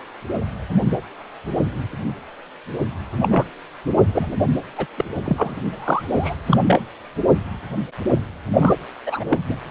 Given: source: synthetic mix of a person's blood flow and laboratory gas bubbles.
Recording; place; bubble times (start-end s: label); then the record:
Doppler ultrasound of blood flow; precordium
3.21-3.45 s: bubbles
4.14-4.36 s: bubbles
4.77-4.86 s: bubbles
4.98-5.05 s: bubbles
5.24-5.55 s: bubbles
5.78-6.35 s: bubbles
6.46-6.58 s: bubbles
6.67-6.80 s: bubbles
8.59-8.74 s: bubbles
9.06-9.24 s: bubbles
9.30-9.39 s: bubbles
9.49-9.56 s: bubbles
From the record:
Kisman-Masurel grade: 233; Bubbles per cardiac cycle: several, 3 to 8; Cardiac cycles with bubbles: 50 to 99%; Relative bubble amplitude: loud (0.450 to 0.775); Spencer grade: 3 (all of the cardiac periods contain showers or single bubble signals, but not dominating or overriding the cardiac motion signals); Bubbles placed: only in the low amplitude regions of the cardiac cycle